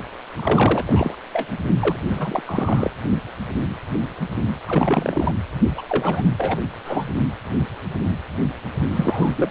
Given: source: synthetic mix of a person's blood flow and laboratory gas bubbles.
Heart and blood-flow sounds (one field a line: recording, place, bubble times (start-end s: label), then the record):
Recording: Doppler ultrasound of blood flow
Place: precordium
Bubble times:
0.37-1.16 s: bubbles
1.33-1.58 s: bubbles
1.80-1.96 s: bubbles
2.09-2.42 s: bubbles
2.46-2.91 s: bubbles
4.65-5.32 s: bubbles
5.75-5.82 s: bubbles
5.89-6.26 s: bubbles
6.38-6.58 s: bubbles
6.84-7.05 s: bubbles
8.90-9.51 s: bubbles
From the record:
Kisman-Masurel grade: 332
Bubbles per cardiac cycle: rolling drumbeat, 9 or more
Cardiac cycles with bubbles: 50 to 99%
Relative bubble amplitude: moderate (0.250 to 0.450)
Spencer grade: 3 (all of the cardiac periods contain showers or single bubble signals, but not dominating or overriding the cardiac motion signals)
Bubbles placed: only in the low amplitude regions of the cardiac cycle